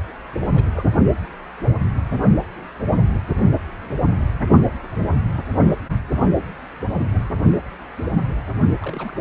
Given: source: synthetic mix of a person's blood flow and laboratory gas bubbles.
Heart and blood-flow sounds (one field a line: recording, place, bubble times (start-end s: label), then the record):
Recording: Doppler ultrasound of blood flow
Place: precordium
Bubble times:
0.40-0.47 s: bubbles
0.54-0.65 s: bubbles
0.74-0.83 s: bubbles
8.79-9.17 s: bubbles
From the record:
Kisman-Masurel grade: 221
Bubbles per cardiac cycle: several, 3 to 8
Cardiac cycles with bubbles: 10 to 50%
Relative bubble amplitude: barely perceptible (0.100 to 0.250)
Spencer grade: 2 (many but less than half of the cardiac periods contain bubble signals, singularly or in groups)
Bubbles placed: only in the low amplitude regions of the cardiac cycle